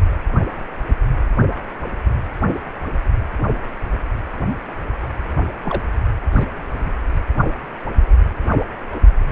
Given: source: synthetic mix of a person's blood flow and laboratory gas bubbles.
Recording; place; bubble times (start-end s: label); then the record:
Doppler ultrasound of blood flow; precordium
5.62-5.83 s: bubbles
6.33-6.44 s: bubbles
From the record:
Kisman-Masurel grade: 122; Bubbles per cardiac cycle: 1 to 2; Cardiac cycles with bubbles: 10 to 50%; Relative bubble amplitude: moderate (0.250 to 0.450); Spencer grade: 2 (many but less than half of the cardiac periods contain bubble signals, singularly or in groups); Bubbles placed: anywhere in the cardiac cycle